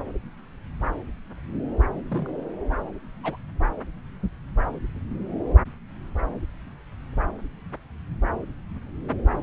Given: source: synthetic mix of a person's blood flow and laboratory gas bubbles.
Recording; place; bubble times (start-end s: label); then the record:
Doppler ultrasound of blood flow; subclavian vein
1.92-2.35 s: bubbles
3.23-3.37 s: bubbles
From the record:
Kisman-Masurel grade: 121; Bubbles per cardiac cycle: 1 to 2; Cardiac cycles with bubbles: 10 to 50%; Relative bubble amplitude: barely perceptible (0.100 to 0.250); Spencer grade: 2 (many but less than half of the cardiac periods contain bubble signals, singularly or in groups); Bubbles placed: anywhere in the cardiac cycle